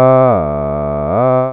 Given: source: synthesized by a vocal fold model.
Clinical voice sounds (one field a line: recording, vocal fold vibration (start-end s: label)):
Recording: sustained vowel that changes in the middle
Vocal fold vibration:
0.00-0.25 s: 129.2 Hz, open quotient 0.51
0.45-1.05 s: 73.3 Hz, open quotient 0.33
1.25-1.53 s: 129.2 Hz, open quotient 0.51